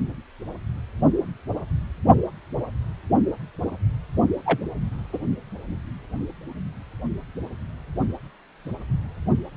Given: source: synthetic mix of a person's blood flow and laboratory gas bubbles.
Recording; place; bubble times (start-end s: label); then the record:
Doppler ultrasound of blood flow; precordium
4.46-4.60 s: bubbles
5.13-5.19 s: bubbles
From the record:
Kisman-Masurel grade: 112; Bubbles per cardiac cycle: 1 to 2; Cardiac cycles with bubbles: 1 to 10%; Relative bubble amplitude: moderate (0.250 to 0.450); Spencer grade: 1 (occasional bubble signal discernible with the cardiac motion signal, with majority of cardiac periods free of bubbles); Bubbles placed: only in the low amplitude regions of the cardiac cycle